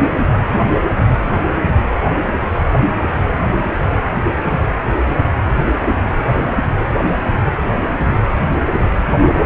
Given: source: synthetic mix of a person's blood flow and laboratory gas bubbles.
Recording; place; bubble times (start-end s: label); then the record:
Doppler ultrasound of blood flow; precordium
0.52-0.62 s: bubbles
From the record:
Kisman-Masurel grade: 111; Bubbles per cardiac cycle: 1 to 2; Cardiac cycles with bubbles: 1 to 10%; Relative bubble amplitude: barely perceptible (0.100 to 0.250); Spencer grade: 1 (occasional bubble signal discernible with the cardiac motion signal, with majority of cardiac periods free of bubbles); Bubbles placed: anywhere in the cardiac cycle